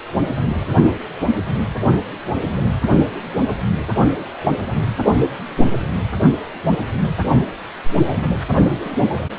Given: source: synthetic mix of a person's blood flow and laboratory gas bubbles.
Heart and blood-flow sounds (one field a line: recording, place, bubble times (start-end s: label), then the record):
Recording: Doppler ultrasound of blood flow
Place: precordium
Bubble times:
3.10-3.26 s: bubbles
4.44-4.51 s: bubbles
8.84-8.90 s: bubbles
From the record:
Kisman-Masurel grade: 121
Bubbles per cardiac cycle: 1 to 2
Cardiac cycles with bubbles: 10 to 50%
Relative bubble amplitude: barely perceptible (0.100 to 0.250)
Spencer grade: 2 (many but less than half of the cardiac periods contain bubble signals, singularly or in groups)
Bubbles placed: only in the low amplitude regions of the cardiac cycle